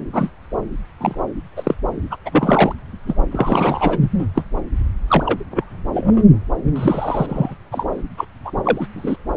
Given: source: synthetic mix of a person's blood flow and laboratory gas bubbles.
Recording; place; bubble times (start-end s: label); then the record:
Doppler ultrasound of blood flow; subclavian vein
0.12-0.30 s: bubbles
1.00-1.15 s: bubbles
1.56-1.75 s: bubbles
2.10-2.16 s: bubbles
2.25-2.73 s: bubbles
3.06-3.15 s: bubbles
3.31-3.98 s: bubbles
4.01-4.09 s: bubbles
4.19-4.26 s: bubbles
4.35-4.43 s: bubbles
5.08-5.37 s: bubbles
5.50-5.65 s: bubbles
5.93-6.23 s: bubbles
6.75-7.54 s: bubbles
7.72-7.87 s: bubbles
8.17-8.25 s: bubbles
8.45-8.51 s: bubbles
8.63-8.87 s: bubbles
8.96-9.16 s: bubbles
From the record:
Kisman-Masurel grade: 243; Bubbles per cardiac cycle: several, 3 to 8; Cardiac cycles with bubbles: 100%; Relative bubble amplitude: loud (0.450 to 0.775); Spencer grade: 3 (all of the cardiac periods contain showers or single bubble signals, but not dominating or overriding the cardiac motion signals); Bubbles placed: anywhere in the cardiac cycle